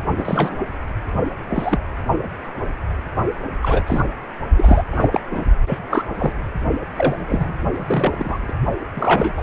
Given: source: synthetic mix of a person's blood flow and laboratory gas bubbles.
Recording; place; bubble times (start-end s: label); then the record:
Doppler ultrasound of blood flow; precordium
0.17-0.55 s: bubbles
1.50-1.81 s: bubbles
3.62-3.83 s: bubbles
3.86-4.05 s: bubbles
4.57-4.83 s: bubbles
4.92-5.08 s: bubbles
5.12-5.21 s: bubbles
5.31-5.45 s: bubbles
5.66-5.79 s: bubbles
5.90-6.06 s: bubbles
6.18-6.33 s: bubbles
6.96-7.54 s: bubbles
7.73-8.53 s: bubbles
8.96-9.33 s: bubbles
9.35-9.43 s: bubbles
From the record:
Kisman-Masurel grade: 233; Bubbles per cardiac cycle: several, 3 to 8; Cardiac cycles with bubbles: 50 to 99%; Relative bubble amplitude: loud (0.450 to 0.775); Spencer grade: 3 (all of the cardiac periods contain showers or single bubble signals, but not dominating or overriding the cardiac motion signals); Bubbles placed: only in the low amplitude regions of the cardiac cycle